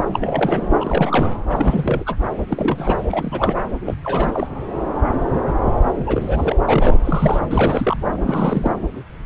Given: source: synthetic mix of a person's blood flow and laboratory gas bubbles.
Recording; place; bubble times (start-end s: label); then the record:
Doppler ultrasound of blood flow; subclavian vein
0.12-0.68 s: bubbles
0.74-1.28 s: bubbles
1.49-2.17 s: bubbles
2.48-3.03 s: bubbles
3.10-3.56 s: bubbles
3.85-3.94 s: bubbles
4.04-4.47 s: bubbles
5.98-6.56 s: bubbles
6.67-6.97 s: bubbles
7.00-7.40 s: bubbles
7.49-7.97 s: bubbles
8.12-8.71 s: bubbles
From the record:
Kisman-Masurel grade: 332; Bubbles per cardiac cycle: rolling drumbeat, 9 or more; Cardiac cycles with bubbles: 50 to 99%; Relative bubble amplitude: moderate (0.250 to 0.450); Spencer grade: 3 (all of the cardiac periods contain showers or single bubble signals, but not dominating or overriding the cardiac motion signals); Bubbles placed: anywhere in the cardiac cycle